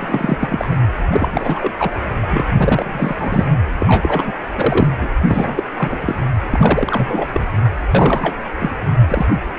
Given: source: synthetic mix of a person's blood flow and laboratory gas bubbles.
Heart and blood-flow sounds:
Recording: Doppler ultrasound of blood flow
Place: precordium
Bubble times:
0.00-0.79 s: bubbles
1.12-1.71 s: bubbles
1.78-1.91 s: bubbles
2.23-2.27 s: bubbles
2.30-2.44 s: bubbles
2.56-3.44 s: bubbles
3.79-4.33 s: bubbles
4.54-4.88 s: bubbles
5.00-5.08 s: bubbles
5.28-5.63 s: bubbles
5.78-6.16 s: bubbles
6.50-7.26 s: bubbles
7.33-7.42 s: bubbles
7.95-8.36 s: bubbles
8.60-8.70 s: bubbles
9.08-9.26 s: bubbles
From the record:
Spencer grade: 3 (all of the cardiac periods contain showers or single bubble signals, but not dominating or overriding the cardiac motion signals)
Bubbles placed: anywhere in the cardiac cycle

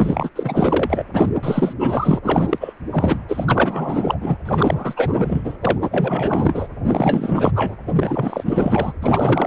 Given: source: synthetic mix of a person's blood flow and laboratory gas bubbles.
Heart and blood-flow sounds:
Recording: Doppler ultrasound of blood flow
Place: precordium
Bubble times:
0.00-0.30 s: bubbles
0.35-1.05 s: bubbles
1.13-1.29 s: bubbles
1.43-1.74 s: bubbles
1.80-2.19 s: bubbles
2.23-2.73 s: bubbles
2.90-3.19 s: bubbles
3.28-4.37 s: bubbles
4.45-5.57 s: bubbles
5.61-6.68 s: bubbles
6.88-7.52 s: bubbles
7.55-7.76 s: bubbles
7.87-8.92 s: bubbles
9.02-9.47 s: bubbles
From the record:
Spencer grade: 4 (maximum detectable bubble signal sounding continuously throughout systole and diastole of every cardiac period, and overriding the amplitude of the normal cardiac signals)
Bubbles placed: anywhere in the cardiac cycle

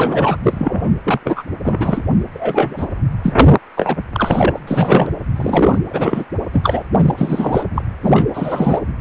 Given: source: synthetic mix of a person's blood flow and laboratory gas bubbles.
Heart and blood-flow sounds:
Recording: Doppler ultrasound of blood flow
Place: precordium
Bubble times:
0.00-0.37 s: bubbles
0.43-0.91 s: bubbles
1.03-1.20 s: bubbles
1.24-1.44 s: bubbles
1.62-2.01 s: bubbles
2.33-2.86 s: bubbles
3.23-3.35 s: bubbles
3.40-3.51 s: bubbles
3.77-3.97 s: bubbles
4.12-4.61 s: bubbles
4.67-5.10 s: bubbles
5.36-5.79 s: bubbles
5.89-6.26 s: bubbles
6.53-6.83 s: bubbles
6.93-7.13 s: bubbles
7.16-7.66 s: bubbles
7.75-7.82 s: bubbles
8.03-8.26 s: bubbles
8.33-8.80 s: bubbles
From the record:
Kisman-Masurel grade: 243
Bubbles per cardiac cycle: several, 3 to 8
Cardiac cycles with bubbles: 100%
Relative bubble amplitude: loud (0.450 to 0.775)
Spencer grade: 3 (all of the cardiac periods contain showers or single bubble signals, but not dominating or overriding the cardiac motion signals)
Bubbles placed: anywhere in the cardiac cycle

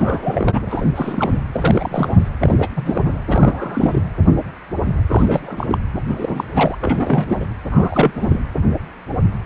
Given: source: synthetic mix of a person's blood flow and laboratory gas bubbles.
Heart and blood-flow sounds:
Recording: Doppler ultrasound of blood flow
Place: precordium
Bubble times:
0.00-0.61 s: bubbles
0.70-0.90 s: bubbles
0.95-1.43 s: bubbles
1.53-2.29 s: bubbles
2.40-2.68 s: bubbles
2.76-3.19 s: bubbles
3.27-4.01 s: bubbles
5.08-5.77 s: bubbles
6.09-6.48 s: bubbles
6.54-6.75 s: bubbles
6.80-7.38 s: bubbles
7.40-7.46 s: bubbles
7.71-8.39 s: bubbles
From the record:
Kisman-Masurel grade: 332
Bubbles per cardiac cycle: rolling drumbeat, 9 or more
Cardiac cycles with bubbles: 50 to 99%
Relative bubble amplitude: moderate (0.250 to 0.450)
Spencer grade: 3 (all of the cardiac periods contain showers or single bubble signals, but not dominating or overriding the cardiac motion signals)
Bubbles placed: anywhere in the cardiac cycle

